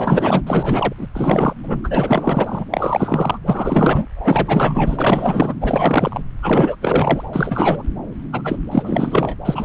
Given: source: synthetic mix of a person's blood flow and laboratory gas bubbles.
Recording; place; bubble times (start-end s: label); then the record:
Doppler ultrasound of blood flow; subclavian vein
0.00-0.42 s: bubbles
0.47-0.94 s: bubbles
0.97-1.07 s: bubbles
1.13-1.53 s: bubbles
1.63-1.81 s: bubbles
1.83-2.65 s: bubbles
2.73-3.38 s: bubbles
3.46-4.06 s: bubbles
4.15-5.54 s: bubbles
5.60-6.21 s: bubbles
6.42-6.76 s: bubbles
6.79-7.22 s: bubbles
7.33-7.82 s: bubbles
8.32-8.56 s: bubbles
8.71-9.36 s: bubbles
9.45-9.65 s: bubbles
From the record:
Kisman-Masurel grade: 444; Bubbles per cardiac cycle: continuous sound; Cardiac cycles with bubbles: 100%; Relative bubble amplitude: maximal (0.775 to 0.999); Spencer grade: 4 (maximum detectable bubble signal sounding continuously throughout systole and diastole of every cardiac period, and overriding the amplitude of the normal cardiac signals); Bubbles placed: anywhere in the cardiac cycle